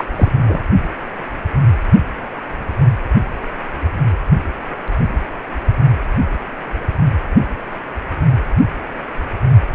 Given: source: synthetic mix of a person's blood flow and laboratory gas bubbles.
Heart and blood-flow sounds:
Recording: Doppler ultrasound of blood flow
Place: precordium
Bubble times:
0.00-0.04 s: bubbles
0.16-0.30 s: bubbles
0.43-0.61 s: bubbles
From the record:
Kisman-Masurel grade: 212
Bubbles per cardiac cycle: several, 3 to 8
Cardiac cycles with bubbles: 1 to 10%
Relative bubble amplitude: moderate (0.250 to 0.450)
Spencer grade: 1 (occasional bubble signal discernible with the cardiac motion signal, with majority of cardiac periods free of bubbles)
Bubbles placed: anywhere in the cardiac cycle

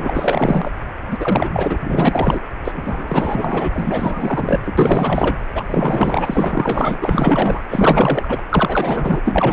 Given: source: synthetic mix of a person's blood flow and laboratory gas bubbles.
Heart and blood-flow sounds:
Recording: Doppler ultrasound of blood flow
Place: precordium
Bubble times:
0.00-0.72 s: bubbles
1.10-1.79 s: bubbles
1.82-2.40 s: bubbles
2.64-3.70 s: bubbles
3.73-4.59 s: bubbles
4.66-4.73 s: bubbles
4.77-5.36 s: bubbles
5.55-5.64 s: bubbles
5.69-6.98 s: bubbles
7.01-7.62 s: bubbles
7.70-8.39 s: bubbles
8.49-9.23 s: bubbles
9.25-9.53 s: bubbles
From the record:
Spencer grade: 4 (maximum detectable bubble signal sounding continuously throughout systole and diastole of every cardiac period, and overriding the amplitude of the normal cardiac signals)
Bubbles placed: anywhere in the cardiac cycle

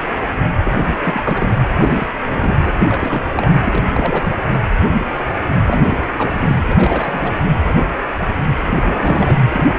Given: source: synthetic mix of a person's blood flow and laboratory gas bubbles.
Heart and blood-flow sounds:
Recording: Doppler ultrasound of blood flow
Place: precordium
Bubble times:
0.65-0.71 s: bubbles
1.05-1.56 s: bubbles
1.80-2.08 s: bubbles
2.24-2.57 s: bubbles
2.65-2.73 s: bubbles
2.79-3.29 s: bubbles
3.34-3.49 s: bubbles
3.63-3.89 s: bubbles
3.93-4.33 s: bubbles
5.67-5.97 s: bubbles
6.16-6.65 s: bubbles
6.68-7.33 s: bubbles
8.76-9.42 s: bubbles
9.50-9.64 s: bubbles
From the record:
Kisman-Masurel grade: 332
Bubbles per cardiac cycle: rolling drumbeat, 9 or more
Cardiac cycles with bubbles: 50 to 99%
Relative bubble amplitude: moderate (0.250 to 0.450)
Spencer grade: 3 (all of the cardiac periods contain showers or single bubble signals, but not dominating or overriding the cardiac motion signals)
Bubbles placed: anywhere in the cardiac cycle

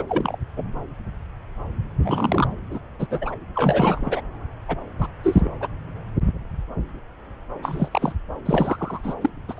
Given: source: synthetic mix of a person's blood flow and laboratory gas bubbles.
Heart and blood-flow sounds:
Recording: Doppler ultrasound of blood flow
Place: subclavian vein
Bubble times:
0.00-0.03 s: bubbles
0.09-0.36 s: bubbles
0.56-0.64 s: bubbles
2.03-2.48 s: bubbles
2.71-2.80 s: bubbles
2.99-3.06 s: bubbles
3.10-3.35 s: bubbles
3.55-4.21 s: bubbles
4.68-4.76 s: bubbles
4.98-5.07 s: bubbles
5.23-5.49 s: bubbles
5.61-5.68 s: bubbles
7.62-7.89 s: bubbles
7.92-8.13 s: bubbles
8.45-9.01 s: bubbles
9.04-9.14 s: bubbles
9.21-9.29 s: bubbles
9.48-9.54 s: bubbles
9.57-9.60 s: bubbles
From the record:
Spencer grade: 3 (all of the cardiac periods contain showers or single bubble signals, but not dominating or overriding the cardiac motion signals)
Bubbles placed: anywhere in the cardiac cycle

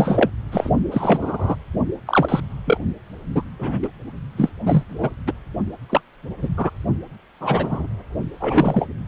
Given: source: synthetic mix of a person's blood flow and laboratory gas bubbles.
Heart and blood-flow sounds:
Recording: Doppler ultrasound of blood flow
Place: precordium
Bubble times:
0.00-0.29 s: bubbles
0.51-0.70 s: bubbles
0.91-1.56 s: bubbles
2.06-2.41 s: bubbles
2.65-2.78 s: bubbles
3.35-3.43 s: bubbles
3.59-3.79 s: bubbles
3.82-3.89 s: bubbles
4.37-4.50 s: bubbles
4.65-4.83 s: bubbles
4.89-5.10 s: bubbles
5.26-5.32 s: bubbles
5.89-6.01 s: bubbles
6.41-6.49 s: bubbles
6.57-6.70 s: bubbles
7.40-7.87 s: bubbles
8.40-8.87 s: bubbles
From the record:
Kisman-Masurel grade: 242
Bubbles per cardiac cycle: several, 3 to 8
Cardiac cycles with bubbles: 100%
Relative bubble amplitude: moderate (0.250 to 0.450)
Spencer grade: 3 (all of the cardiac periods contain showers or single bubble signals, but not dominating or overriding the cardiac motion signals)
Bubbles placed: only in the low amplitude regions of the cardiac cycle

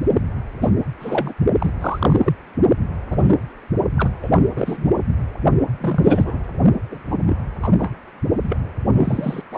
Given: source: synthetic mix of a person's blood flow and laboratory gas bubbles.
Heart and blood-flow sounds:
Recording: Doppler ultrasound of blood flow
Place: precordium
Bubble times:
0.60-0.70 s: bubbles
1.00-1.33 s: bubbles
1.58-1.71 s: bubbles
1.80-2.32 s: bubbles
3.10-3.42 s: bubbles
3.97-4.11 s: bubbles
4.22-4.31 s: bubbles
4.34-4.43 s: bubbles
4.56-4.91 s: bubbles
5.81-6.38 s: bubbles
6.91-6.99 s: bubbles
7.11-7.17 s: bubbles
7.26-7.37 s: bubbles
7.62-7.69 s: bubbles
7.78-7.92 s: bubbles
8.43-8.59 s: bubbles
8.95-9.43 s: bubbles
9.51-9.57 s: bubbles
From the record:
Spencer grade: 3 (all of the cardiac periods contain showers or single bubble signals, but not dominating or overriding the cardiac motion signals)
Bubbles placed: only in the low amplitude regions of the cardiac cycle

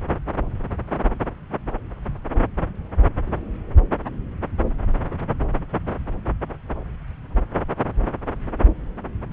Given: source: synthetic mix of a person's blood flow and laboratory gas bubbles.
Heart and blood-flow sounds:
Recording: Doppler ultrasound of blood flow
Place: subclavian vein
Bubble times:
no bubbles
From the record:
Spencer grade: 0 (complete lack of bubble signals)

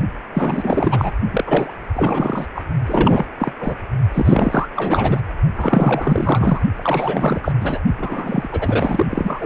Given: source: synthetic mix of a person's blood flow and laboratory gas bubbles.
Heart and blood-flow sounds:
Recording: Doppler ultrasound of blood flow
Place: precordium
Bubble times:
0.33-1.12 s: bubbles
1.30-1.75 s: bubbles
1.94-2.47 s: bubbles
2.55-2.63 s: bubbles
2.86-3.27 s: bubbles
3.38-3.52 s: bubbles
3.60-3.75 s: bubbles
4.13-4.69 s: bubbles
4.76-5.21 s: bubbles
5.56-6.62 s: bubbles
6.76-7.53 s: bubbles
7.60-7.79 s: bubbles
7.98-8.47 s: bubbles
8.51-9.07 s: bubbles
9.10-9.46 s: bubbles
From the record:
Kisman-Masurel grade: 444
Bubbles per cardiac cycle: continuous sound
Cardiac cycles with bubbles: 100%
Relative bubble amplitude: maximal (0.775 to 0.999)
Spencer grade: 4 (maximum detectable bubble signal sounding continuously throughout systole and diastole of every cardiac period, and overriding the amplitude of the normal cardiac signals)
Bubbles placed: only in the low amplitude regions of the cardiac cycle

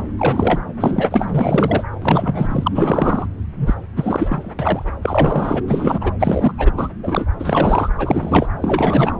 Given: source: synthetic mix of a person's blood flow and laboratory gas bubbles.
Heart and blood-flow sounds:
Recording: Doppler ultrasound of blood flow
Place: subclavian vein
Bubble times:
0.18-0.61 s: bubbles
0.80-1.27 s: bubbles
1.31-1.83 s: bubbles
2.01-2.69 s: bubbles
2.74-3.26 s: bubbles
3.56-3.75 s: bubbles
3.96-4.53 s: bubbles
4.59-4.85 s: bubbles
5.02-5.62 s: bubbles
5.67-6.12 s: bubbles
6.19-6.53 s: bubbles
6.58-6.71 s: bubbles
6.77-6.89 s: bubbles
7.03-7.25 s: bubbles
7.39-7.90 s: bubbles
7.98-8.48 s: bubbles
8.61-9.12 s: bubbles
From the record:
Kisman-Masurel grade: 343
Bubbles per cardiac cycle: rolling drumbeat, 9 or more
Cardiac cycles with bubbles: 100%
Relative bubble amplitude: loud (0.450 to 0.775)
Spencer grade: 3 (all of the cardiac periods contain showers or single bubble signals, but not dominating or overriding the cardiac motion signals)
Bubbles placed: anywhere in the cardiac cycle

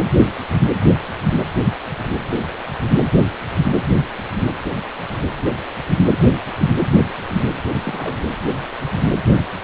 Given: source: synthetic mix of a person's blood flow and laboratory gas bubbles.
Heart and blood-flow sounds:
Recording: Doppler ultrasound of blood flow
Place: precordium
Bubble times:
7.68-7.71 s: bubbles
7.74-8.22 s: bubbles
From the record:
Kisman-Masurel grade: 211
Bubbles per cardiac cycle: several, 3 to 8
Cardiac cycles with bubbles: 1 to 10%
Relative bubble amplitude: barely perceptible (0.100 to 0.250)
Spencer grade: 1 (occasional bubble signal discernible with the cardiac motion signal, with majority of cardiac periods free of bubbles)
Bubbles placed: anywhere in the cardiac cycle

